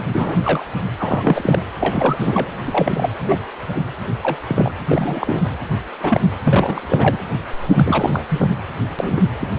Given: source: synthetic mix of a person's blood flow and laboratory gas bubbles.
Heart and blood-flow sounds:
Doppler ultrasound of blood flow; precordium
0.12-0.37 s: bubbles
0.45-0.65 s: bubbles
0.98-1.66 s: bubbles
1.80-2.49 s: bubbles
2.66-3.10 s: bubbles
3.20-3.37 s: bubbles
3.75-3.83 s: bubbles
4.22-4.71 s: bubbles
4.88-5.44 s: bubbles
6.00-6.20 s: bubbles
6.44-7.17 s: bubbles
7.71-8.24 s: bubbles
8.29-8.51 s: bubbles
8.99-9.23 s: bubbles
9.41-9.59 s: bubbles
From the record:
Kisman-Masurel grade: 242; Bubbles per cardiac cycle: several, 3 to 8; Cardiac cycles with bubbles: 100%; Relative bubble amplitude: moderate (0.250 to 0.450); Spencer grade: 3 (all of the cardiac periods contain showers or single bubble signals, but not dominating or overriding the cardiac motion signals); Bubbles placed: anywhere in the cardiac cycle

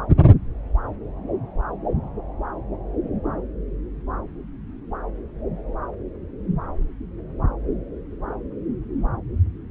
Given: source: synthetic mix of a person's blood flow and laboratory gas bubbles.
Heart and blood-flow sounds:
Doppler ultrasound of blood flow; subclavian vein
no bubbles
From the record:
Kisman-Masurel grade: 000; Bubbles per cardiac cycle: 0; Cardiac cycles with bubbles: 0%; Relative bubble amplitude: no bubbles discernible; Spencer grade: 0 (complete lack of bubble signals)

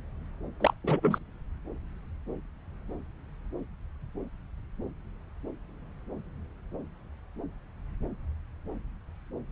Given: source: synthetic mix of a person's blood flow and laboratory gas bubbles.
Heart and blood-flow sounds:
Doppler ultrasound of blood flow; subclavian vein
0.60-0.73 s: bubbles
0.84-1.18 s: bubbles
From the record:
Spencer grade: 1 (occasional bubble signal discernible with the cardiac motion signal, with majority of cardiac periods free of bubbles); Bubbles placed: anywhere in the cardiac cycle

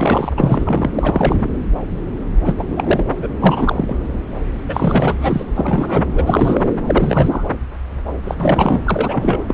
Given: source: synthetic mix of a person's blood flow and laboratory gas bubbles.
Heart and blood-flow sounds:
Doppler ultrasound of blood flow; subclavian vein
0.00-0.33 s: bubbles
0.37-0.90 s: bubbles
0.93-1.48 s: bubbles
2.45-2.55 s: bubbles
2.58-2.64 s: bubbles
2.70-3.04 s: bubbles
3.22-3.29 s: bubbles
3.40-3.94 s: bubbles
4.69-5.44 s: bubbles
5.55-6.64 s: bubbles
6.86-7.43 s: bubbles
8.22-8.79 s: bubbles
8.85-9.44 s: bubbles
9.48-9.54 s: bubbles
From the record:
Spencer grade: 3 (all of the cardiac periods contain showers or single bubble signals, but not dominating or overriding the cardiac motion signals); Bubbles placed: anywhere in the cardiac cycle

